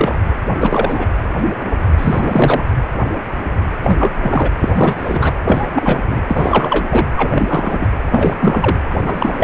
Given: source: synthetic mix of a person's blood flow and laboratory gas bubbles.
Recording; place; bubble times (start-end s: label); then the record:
Doppler ultrasound of blood flow; precordium
0.00-0.18 s: bubbles
0.59-1.07 s: bubbles
1.97-2.63 s: bubbles
3.82-4.12 s: bubbles
4.21-4.50 s: bubbles
4.60-4.94 s: bubbles
4.97-5.33 s: bubbles
5.44-5.68 s: bubbles
5.75-6.01 s: bubbles
6.10-6.21 s: bubbles
6.27-6.84 s: bubbles
6.91-7.07 s: bubbles
7.17-7.90 s: bubbles
8.11-8.34 s: bubbles
8.40-8.77 s: bubbles
8.90-9.44 s: bubbles
From the record:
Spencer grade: 3 (all of the cardiac periods contain showers or single bubble signals, but not dominating or overriding the cardiac motion signals); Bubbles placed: anywhere in the cardiac cycle